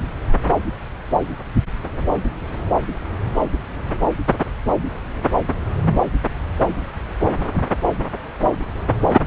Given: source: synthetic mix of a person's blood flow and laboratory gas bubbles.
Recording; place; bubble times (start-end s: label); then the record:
Doppler ultrasound of blood flow; subclavian vein
no bubbles
From the record:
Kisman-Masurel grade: 000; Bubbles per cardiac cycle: 0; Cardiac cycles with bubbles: 0%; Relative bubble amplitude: no bubbles discernible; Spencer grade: 0 (complete lack of bubble signals)